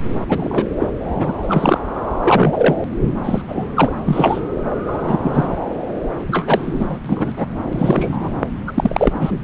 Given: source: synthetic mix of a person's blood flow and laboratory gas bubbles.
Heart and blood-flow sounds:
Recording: Doppler ultrasound of blood flow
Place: subclavian vein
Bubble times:
0.28-0.67 s: bubbles
0.80-0.90 s: bubbles
1.16-1.33 s: bubbles
1.42-1.80 s: bubbles
2.23-2.76 s: bubbles
3.23-3.42 s: bubbles
3.48-3.67 s: bubbles
3.76-3.92 s: bubbles
4.04-4.41 s: bubbles
4.86-5.20 s: bubbles
5.22-5.57 s: bubbles
6.28-6.98 s: bubbles
7.05-7.32 s: bubbles
7.37-7.46 s: bubbles
7.71-8.32 s: bubbles
8.67-9.42 s: bubbles
From the record:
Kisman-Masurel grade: 243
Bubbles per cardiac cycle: several, 3 to 8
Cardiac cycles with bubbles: 100%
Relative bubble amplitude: loud (0.450 to 0.775)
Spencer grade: 3 (all of the cardiac periods contain showers or single bubble signals, but not dominating or overriding the cardiac motion signals)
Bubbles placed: anywhere in the cardiac cycle

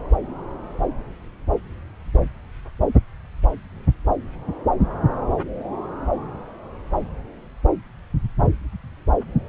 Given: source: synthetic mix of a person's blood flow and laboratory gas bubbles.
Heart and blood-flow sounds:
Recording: Doppler ultrasound of blood flow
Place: subclavian vein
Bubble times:
no bubbles
From the record:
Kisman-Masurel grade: 000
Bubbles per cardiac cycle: 0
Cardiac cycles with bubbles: 0%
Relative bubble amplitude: no bubbles discernible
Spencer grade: 0 (complete lack of bubble signals)

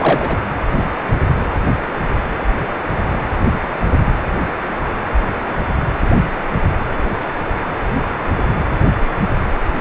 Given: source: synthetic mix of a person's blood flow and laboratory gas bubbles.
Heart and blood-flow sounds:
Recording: Doppler ultrasound of blood flow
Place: precordium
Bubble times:
0.00-0.40 s: bubbles
From the record:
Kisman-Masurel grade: 212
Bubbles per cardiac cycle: several, 3 to 8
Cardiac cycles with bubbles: 1 to 10%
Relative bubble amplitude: moderate (0.250 to 0.450)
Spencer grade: 1 (occasional bubble signal discernible with the cardiac motion signal, with majority of cardiac periods free of bubbles)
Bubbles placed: anywhere in the cardiac cycle

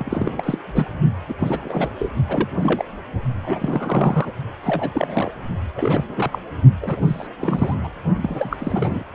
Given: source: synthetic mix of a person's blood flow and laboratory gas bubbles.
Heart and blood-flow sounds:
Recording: Doppler ultrasound of blood flow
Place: precordium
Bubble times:
0.00-0.58 s: bubbles
0.65-0.89 s: bubbles
1.28-1.34 s: bubbles
1.39-1.94 s: bubbles
1.99-2.12 s: bubbles
2.29-2.49 s: bubbles
2.57-2.85 s: bubbles
3.43-4.31 s: bubbles
4.63-4.90 s: bubbles
4.93-5.31 s: bubbles
5.76-6.05 s: bubbles
6.08-6.39 s: bubbles
6.81-7.27 s: bubbles
7.40-7.75 s: bubbles
7.83-7.88 s: bubbles
8.22-9.03 s: bubbles
From the record:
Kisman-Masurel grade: 342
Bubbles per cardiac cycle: rolling drumbeat, 9 or more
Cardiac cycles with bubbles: 100%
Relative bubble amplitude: moderate (0.250 to 0.450)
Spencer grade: 3 (all of the cardiac periods contain showers or single bubble signals, but not dominating or overriding the cardiac motion signals)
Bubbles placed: only in the low amplitude regions of the cardiac cycle

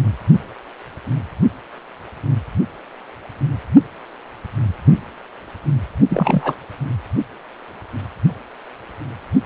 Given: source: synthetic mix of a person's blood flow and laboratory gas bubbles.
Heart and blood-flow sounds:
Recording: Doppler ultrasound of blood flow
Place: precordium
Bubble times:
6.09-6.55 s: bubbles
From the record:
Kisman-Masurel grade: 213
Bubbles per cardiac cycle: several, 3 to 8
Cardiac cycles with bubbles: 1 to 10%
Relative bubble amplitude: loud (0.450 to 0.775)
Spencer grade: 1 (occasional bubble signal discernible with the cardiac motion signal, with majority of cardiac periods free of bubbles)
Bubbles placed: only in the low amplitude regions of the cardiac cycle

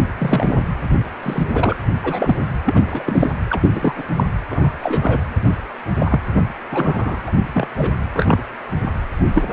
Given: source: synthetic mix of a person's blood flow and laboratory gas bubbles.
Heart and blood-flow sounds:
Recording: Doppler ultrasound of blood flow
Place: precordium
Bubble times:
0.18-0.65 s: bubbles
1.23-1.44 s: bubbles
1.53-1.76 s: bubbles
1.86-1.93 s: bubbles
2.03-2.45 s: bubbles
2.64-3.30 s: bubbles
3.49-4.06 s: bubbles
4.16-4.24 s: bubbles
4.49-4.72 s: bubbles
4.79-5.21 s: bubbles
5.99-6.21 s: bubbles
6.71-7.21 s: bubbles
7.27-7.32 s: bubbles
7.54-7.67 s: bubbles
7.78-7.90 s: bubbles
8.13-8.42 s: bubbles
9.34-9.48 s: bubbles
From the record:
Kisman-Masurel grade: 242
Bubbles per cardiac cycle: several, 3 to 8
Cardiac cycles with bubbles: 100%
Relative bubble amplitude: moderate (0.250 to 0.450)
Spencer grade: 3 (all of the cardiac periods contain showers or single bubble signals, but not dominating or overriding the cardiac motion signals)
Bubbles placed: anywhere in the cardiac cycle

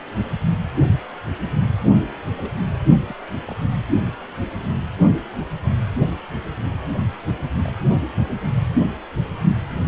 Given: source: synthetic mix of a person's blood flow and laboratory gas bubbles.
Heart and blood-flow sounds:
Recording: Doppler ultrasound of blood flow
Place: precordium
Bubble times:
2.37-2.54 s: bubbles
3.08-3.14 s: bubbles
3.48-3.55 s: bubbles
6.58-6.66 s: bubbles
7.63-7.72 s: bubbles
From the record:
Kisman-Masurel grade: 121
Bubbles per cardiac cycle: 1 to 2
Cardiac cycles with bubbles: 10 to 50%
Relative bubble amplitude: barely perceptible (0.100 to 0.250)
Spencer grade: 2 (many but less than half of the cardiac periods contain bubble signals, singularly or in groups)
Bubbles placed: only in the low amplitude regions of the cardiac cycle

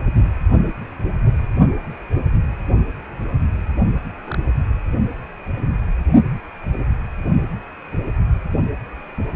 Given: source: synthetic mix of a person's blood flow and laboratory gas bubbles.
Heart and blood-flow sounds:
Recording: Doppler ultrasound of blood flow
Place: precordium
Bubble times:
4.24-4.38 s: bubbles
From the record:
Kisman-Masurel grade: 111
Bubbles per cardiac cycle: 1 to 2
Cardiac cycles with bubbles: 1 to 10%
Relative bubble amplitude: barely perceptible (0.100 to 0.250)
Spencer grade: 1 (occasional bubble signal discernible with the cardiac motion signal, with majority of cardiac periods free of bubbles)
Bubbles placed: only in the low amplitude regions of the cardiac cycle

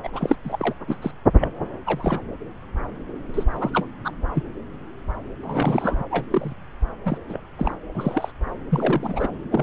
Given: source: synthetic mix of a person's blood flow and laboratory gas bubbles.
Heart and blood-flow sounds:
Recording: Doppler ultrasound of blood flow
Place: subclavian vein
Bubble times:
0.03-0.10 s: bubbles
0.12-0.37 s: bubbles
0.45-0.74 s: bubbles
0.88-0.98 s: bubbles
1.01-1.11 s: bubbles
1.41-1.48 s: bubbles
1.86-2.19 s: bubbles
3.33-3.44 s: bubbles
3.50-3.71 s: bubbles
3.74-3.87 s: bubbles
4.04-4.11 s: bubbles
4.34-4.43 s: bubbles
5.43-6.03 s: bubbles
6.10-6.26 s: bubbles
6.30-6.53 s: bubbles
7.05-7.17 s: bubbles
7.29-7.40 s: bubbles
7.58-7.74 s: bubbles
7.94-8.32 s: bubbles
8.70-9.28 s: bubbles
9.51-9.63 s: bubbles
From the record:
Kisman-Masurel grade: 232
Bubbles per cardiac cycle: several, 3 to 8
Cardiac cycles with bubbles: 50 to 99%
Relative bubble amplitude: moderate (0.250 to 0.450)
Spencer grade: 3 (all of the cardiac periods contain showers or single bubble signals, but not dominating or overriding the cardiac motion signals)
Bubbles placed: anywhere in the cardiac cycle

